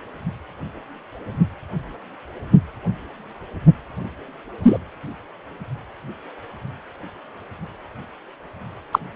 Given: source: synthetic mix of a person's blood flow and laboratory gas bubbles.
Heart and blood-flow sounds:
Doppler ultrasound of blood flow; precordium
4.63-4.78 s: bubbles
8.92-8.99 s: bubbles
From the record:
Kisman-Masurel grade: 123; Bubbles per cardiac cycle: 1 to 2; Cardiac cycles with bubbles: 10 to 50%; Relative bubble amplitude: loud (0.450 to 0.775); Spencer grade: 2 (many but less than half of the cardiac periods contain bubble signals, singularly or in groups); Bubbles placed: only in the low amplitude regions of the cardiac cycle

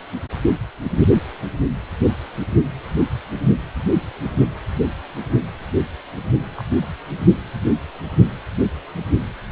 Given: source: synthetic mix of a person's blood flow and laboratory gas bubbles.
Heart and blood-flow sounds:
Doppler ultrasound of blood flow; precordium
6.56-6.64 s: bubbles
6.81-6.88 s: bubbles
From the record:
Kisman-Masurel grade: 111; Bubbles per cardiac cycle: 1 to 2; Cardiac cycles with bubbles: 1 to 10%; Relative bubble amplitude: barely perceptible (0.100 to 0.250); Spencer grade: 1 (occasional bubble signal discernible with the cardiac motion signal, with majority of cardiac periods free of bubbles); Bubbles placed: anywhere in the cardiac cycle

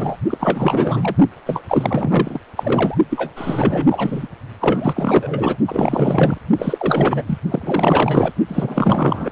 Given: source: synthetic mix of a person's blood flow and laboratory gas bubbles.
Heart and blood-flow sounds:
Doppler ultrasound of blood flow; precordium
0.00-0.17 s: bubbles
0.30-1.16 s: bubbles
1.46-1.62 s: bubbles
1.68-2.40 s: bubbles
2.56-2.98 s: bubbles
3.10-3.31 s: bubbles
3.36-4.27 s: bubbles
4.59-5.57 s: bubbles
5.67-6.38 s: bubbles
6.57-7.22 s: bubbles
7.26-7.38 s: bubbles
7.48-8.33 s: bubbles
8.48-9.30 s: bubbles
From the record:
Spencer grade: 4 (maximum detectable bubble signal sounding continuously throughout systole and diastole of every cardiac period, and overriding the amplitude of the normal cardiac signals); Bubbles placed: only in the low amplitude regions of the cardiac cycle

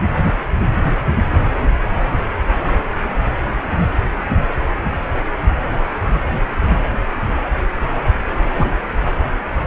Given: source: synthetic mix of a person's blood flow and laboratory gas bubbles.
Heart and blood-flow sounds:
Doppler ultrasound of blood flow; precordium
8.58-8.71 s: bubbles
From the record:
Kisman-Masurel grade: 113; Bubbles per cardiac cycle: 1 to 2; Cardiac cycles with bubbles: 1 to 10%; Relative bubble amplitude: loud (0.450 to 0.775); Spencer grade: 1 (occasional bubble signal discernible with the cardiac motion signal, with majority of cardiac periods free of bubbles); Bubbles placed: anywhere in the cardiac cycle

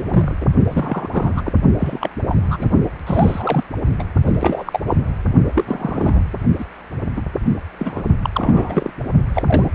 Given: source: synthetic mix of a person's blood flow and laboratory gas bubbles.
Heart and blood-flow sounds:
Doppler ultrasound of blood flow; precordium
0.00-0.38 s: bubbles
0.40-0.46 s: bubbles
0.68-1.41 s: bubbles
1.45-1.53 s: bubbles
1.77-2.10 s: bubbles
2.27-2.69 s: bubbles
3.06-3.63 s: bubbles
3.98-4.04 s: bubbles
4.26-4.80 s: bubbles
4.87-4.97 s: bubbles
5.54-6.22 s: bubbles
6.59-6.65 s: bubbles
7.16-7.22 s: bubbles
7.79-8.03 s: bubbles
8.22-8.29 s: bubbles
8.33-8.92 s: bubbles
9.34-9.43 s: bubbles
9.46-9.71 s: bubbles
From the record:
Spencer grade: 3 (all of the cardiac periods contain showers or single bubble signals, but not dominating or overriding the cardiac motion signals); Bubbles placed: only in the low amplitude regions of the cardiac cycle

